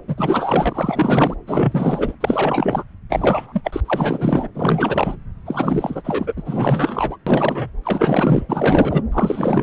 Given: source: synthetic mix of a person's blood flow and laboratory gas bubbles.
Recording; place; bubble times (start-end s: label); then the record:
Doppler ultrasound of blood flow; subclavian vein
0.07-1.36 s: bubbles
1.47-2.15 s: bubbles
2.20-2.83 s: bubbles
3.09-3.61 s: bubbles
3.63-3.80 s: bubbles
3.84-4.47 s: bubbles
4.54-5.16 s: bubbles
5.45-7.17 s: bubbles
7.26-7.71 s: bubbles
7.83-8.45 s: bubbles
8.48-9.03 s: bubbles
9.12-9.63 s: bubbles
From the record:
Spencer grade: 4 (maximum detectable bubble signal sounding continuously throughout systole and diastole of every cardiac period, and overriding the amplitude of the normal cardiac signals); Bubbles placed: anywhere in the cardiac cycle